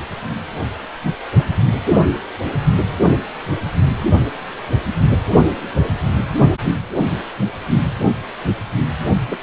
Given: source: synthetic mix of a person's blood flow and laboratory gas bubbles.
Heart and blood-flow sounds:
Doppler ultrasound of blood flow; precordium
9.28-9.38 s: bubbles
From the record:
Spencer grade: 1 (occasional bubble signal discernible with the cardiac motion signal, with majority of cardiac periods free of bubbles); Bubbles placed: only in the low amplitude regions of the cardiac cycle

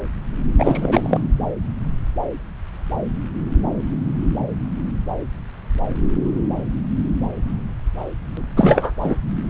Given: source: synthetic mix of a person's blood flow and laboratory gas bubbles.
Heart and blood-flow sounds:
Doppler ultrasound of blood flow; subclavian vein
0.58-1.21 s: bubbles
8.56-8.94 s: bubbles
9.01-9.19 s: bubbles
From the record:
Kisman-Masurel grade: 223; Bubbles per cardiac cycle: several, 3 to 8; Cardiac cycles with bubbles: 10 to 50%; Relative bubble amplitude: loud (0.450 to 0.775); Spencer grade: 2 (many but less than half of the cardiac periods contain bubble signals, singularly or in groups); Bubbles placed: anywhere in the cardiac cycle

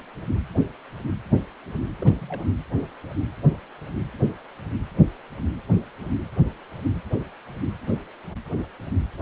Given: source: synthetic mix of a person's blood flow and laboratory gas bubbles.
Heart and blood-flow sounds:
Doppler ultrasound of blood flow; precordium
2.01-2.16 s: bubbles
2.21-2.48 s: bubbles
From the record:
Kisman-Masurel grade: 211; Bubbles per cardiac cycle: several, 3 to 8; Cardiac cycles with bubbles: 1 to 10%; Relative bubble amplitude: barely perceptible (0.100 to 0.250); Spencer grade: 1 (occasional bubble signal discernible with the cardiac motion signal, with majority of cardiac periods free of bubbles); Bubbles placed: anywhere in the cardiac cycle

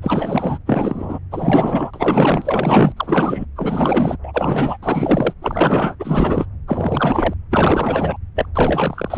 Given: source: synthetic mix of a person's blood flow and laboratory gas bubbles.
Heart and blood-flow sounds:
Doppler ultrasound of blood flow; subclavian vein
0.02-0.58 s: bubbles
0.66-1.19 s: bubbles
1.31-1.91 s: bubbles
1.93-2.92 s: bubbles
2.96-3.45 s: bubbles
3.56-4.17 s: bubbles
4.24-4.77 s: bubbles
4.83-5.33 s: bubbles
5.42-5.96 s: bubbles
5.99-6.46 s: bubbles
6.67-7.33 s: bubbles
7.50-8.17 s: bubbles
8.35-8.46 s: bubbles
8.54-9.18 s: bubbles
From the record:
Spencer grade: 4 (maximum detectable bubble signal sounding continuously throughout systole and diastole of every cardiac period, and overriding the amplitude of the normal cardiac signals); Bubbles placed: anywhere in the cardiac cycle

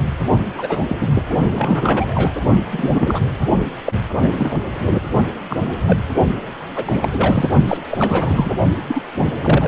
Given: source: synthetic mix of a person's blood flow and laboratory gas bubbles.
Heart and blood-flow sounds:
Doppler ultrasound of blood flow; precordium
0.39-0.44 s: bubbles
0.58-0.82 s: bubbles
0.89-0.97 s: bubbles
1.00-1.07 s: bubbles
1.14-1.23 s: bubbles
1.55-2.33 s: bubbles
2.73-3.20 s: bubbles
3.85-3.93 s: bubbles
4.22-4.29 s: bubbles
4.37-4.60 s: bubbles
5.50-5.76 s: bubbles
5.86-6.00 s: bubbles
6.76-7.09 s: bubbles
7.12-7.50 s: bubbles
7.67-7.77 s: bubbles
7.91-8.52 s: bubbles
8.87-9.02 s: bubbles
9.18-9.68 s: bubbles
From the record:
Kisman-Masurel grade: 242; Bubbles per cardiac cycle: several, 3 to 8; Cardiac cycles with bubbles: 100%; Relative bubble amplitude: moderate (0.250 to 0.450); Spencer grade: 3 (all of the cardiac periods contain showers or single bubble signals, but not dominating or overriding the cardiac motion signals); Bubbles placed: only in the low amplitude regions of the cardiac cycle

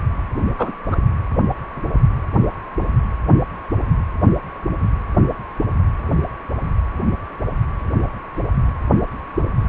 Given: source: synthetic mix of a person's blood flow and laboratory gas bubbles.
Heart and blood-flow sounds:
Doppler ultrasound of blood flow; precordium
0.58-0.72 s: bubbles
0.91-0.96 s: bubbles
From the record:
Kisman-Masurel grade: 113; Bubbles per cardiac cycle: 1 to 2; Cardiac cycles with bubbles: 1 to 10%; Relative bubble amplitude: loud (0.450 to 0.775); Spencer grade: 1 (occasional bubble signal discernible with the cardiac motion signal, with majority of cardiac periods free of bubbles); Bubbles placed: anywhere in the cardiac cycle

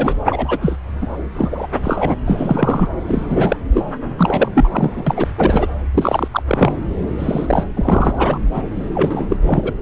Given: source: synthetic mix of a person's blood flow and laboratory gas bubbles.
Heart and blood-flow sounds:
Doppler ultrasound of blood flow; subclavian vein
0.00-0.15 s: bubbles
0.26-0.77 s: bubbles
1.01-1.07 s: bubbles
1.37-1.68 s: bubbles
1.83-2.14 s: bubbles
2.25-2.89 s: bubbles
3.08-3.56 s: bubbles
3.72-3.83 s: bubbles
4.18-4.50 s: bubbles
4.54-5.03 s: bubbles
5.07-5.28 s: bubbles
5.37-5.67 s: bubbles
5.94-6.28 s: bubbles
6.31-6.43 s: bubbles
6.47-6.73 s: bubbles
7.19-7.67 s: bubbles
7.76-8.38 s: bubbles
8.54-8.63 s: bubbles
8.94-9.37 s: bubbles
9.42-9.74 s: bubbles
From the record:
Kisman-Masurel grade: 343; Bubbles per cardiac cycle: rolling drumbeat, 9 or more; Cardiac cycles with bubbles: 100%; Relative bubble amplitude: loud (0.450 to 0.775); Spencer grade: 3 (all of the cardiac periods contain showers or single bubble signals, but not dominating or overriding the cardiac motion signals); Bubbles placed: anywhere in the cardiac cycle

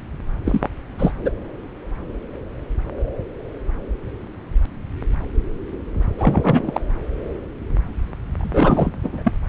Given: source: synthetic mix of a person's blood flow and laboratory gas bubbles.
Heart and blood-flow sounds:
Doppler ultrasound of blood flow; subclavian vein
0.45-0.68 s: bubbles
0.98-1.12 s: bubbles
1.23-1.30 s: bubbles
6.18-6.81 s: bubbles
8.38-8.91 s: bubbles
9.04-9.32 s: bubbles
9.47-9.49 s: bubbles
From the record:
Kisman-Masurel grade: 222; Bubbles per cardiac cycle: several, 3 to 8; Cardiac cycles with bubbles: 10 to 50%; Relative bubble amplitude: moderate (0.250 to 0.450); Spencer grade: 2 (many but less than half of the cardiac periods contain bubble signals, singularly or in groups); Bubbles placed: anywhere in the cardiac cycle

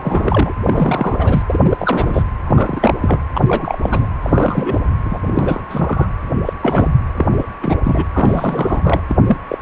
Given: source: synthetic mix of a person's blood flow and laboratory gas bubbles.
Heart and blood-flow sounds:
Doppler ultrasound of blood flow; precordium
0.00-0.53 s: bubbles
0.64-1.43 s: bubbles
1.49-2.23 s: bubbles
2.47-2.95 s: bubbles
3.01-3.20 s: bubbles
3.34-3.78 s: bubbles
3.83-4.07 s: bubbles
4.22-4.80 s: bubbles
5.05-5.18 s: bubbles
5.25-5.61 s: bubbles
5.69-6.07 s: bubbles
6.46-6.53 s: bubbles
6.61-6.92 s: bubbles
7.14-7.26 s: bubbles
7.30-7.46 s: bubbles
7.62-7.77 s: bubbles
7.83-8.05 s: bubbles
8.13-9.01 s: bubbles
9.09-9.17 s: bubbles
9.27-9.38 s: bubbles
9.48-9.61 s: bubbles
From the record:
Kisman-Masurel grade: 342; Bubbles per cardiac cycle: rolling drumbeat, 9 or more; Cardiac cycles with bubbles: 100%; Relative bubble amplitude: moderate (0.250 to 0.450); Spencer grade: 3 (all of the cardiac periods contain showers or single bubble signals, but not dominating or overriding the cardiac motion signals); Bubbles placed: anywhere in the cardiac cycle

